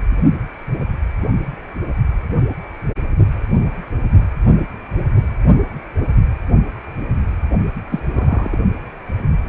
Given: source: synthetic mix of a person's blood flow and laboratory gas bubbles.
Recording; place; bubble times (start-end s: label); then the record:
Doppler ultrasound of blood flow; precordium
7.90-7.99 s: bubbles
8.13-8.60 s: bubbles
From the record:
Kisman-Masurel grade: 122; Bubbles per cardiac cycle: 1 to 2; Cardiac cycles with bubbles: 10 to 50%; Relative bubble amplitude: moderate (0.250 to 0.450); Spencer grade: 2 (many but less than half of the cardiac periods contain bubble signals, singularly or in groups); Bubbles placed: only in the low amplitude regions of the cardiac cycle